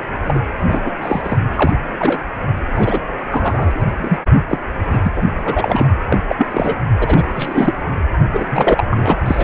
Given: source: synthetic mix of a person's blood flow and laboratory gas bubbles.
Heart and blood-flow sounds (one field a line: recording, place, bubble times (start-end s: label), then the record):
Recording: Doppler ultrasound of blood flow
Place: precordium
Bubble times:
0.22-0.40 s: bubbles
0.68-0.80 s: bubbles
0.85-0.92 s: bubbles
1.02-1.39 s: bubbles
1.56-1.74 s: bubbles
1.98-2.21 s: bubbles
2.75-2.99 s: bubbles
3.30-3.86 s: bubbles
3.98-4.18 s: bubbles
4.49-4.60 s: bubbles
4.90-4.99 s: bubbles
5.03-5.22 s: bubbles
5.45-5.94 s: bubbles
6.10-6.19 s: bubbles
6.29-6.47 s: bubbles
6.51-6.75 s: bubbles
6.99-7.24 s: bubbles
7.35-7.74 s: bubbles
8.33-8.46 s: bubbles
8.49-8.84 s: bubbles
8.90-9.16 s: bubbles
9.26-9.44 s: bubbles
From the record:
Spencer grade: 3 (all of the cardiac periods contain showers or single bubble signals, but not dominating or overriding the cardiac motion signals)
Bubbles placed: anywhere in the cardiac cycle